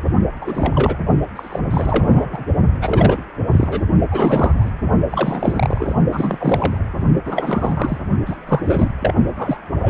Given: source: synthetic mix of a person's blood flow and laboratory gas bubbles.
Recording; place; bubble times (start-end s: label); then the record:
Doppler ultrasound of blood flow; precordium
0.41-0.96 s: bubbles
1.35-1.59 s: bubbles
1.71-2.45 s: bubbles
2.81-3.25 s: bubbles
3.52-3.85 s: bubbles
4.11-4.71 s: bubbles
5.09-5.96 s: bubbles
6.11-6.79 s: bubbles
7.25-7.98 s: bubbles
8.26-8.36 s: bubbles
8.47-8.91 s: bubbles
9.00-9.14 s: bubbles
9.37-9.58 s: bubbles
9.76-9.90 s: bubbles
From the record:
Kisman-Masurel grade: 332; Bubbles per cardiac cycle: rolling drumbeat, 9 or more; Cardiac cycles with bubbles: 50 to 99%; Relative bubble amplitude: moderate (0.250 to 0.450); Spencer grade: 3 (all of the cardiac periods contain showers or single bubble signals, but not dominating or overriding the cardiac motion signals); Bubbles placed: only in the low amplitude regions of the cardiac cycle